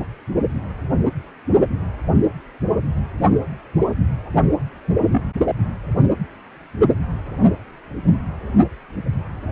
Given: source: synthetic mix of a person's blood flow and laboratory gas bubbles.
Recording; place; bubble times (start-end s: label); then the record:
Doppler ultrasound of blood flow; precordium
5.10-5.27 s: bubbles
From the record:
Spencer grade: 1 (occasional bubble signal discernible with the cardiac motion signal, with majority of cardiac periods free of bubbles); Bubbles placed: only in the low amplitude regions of the cardiac cycle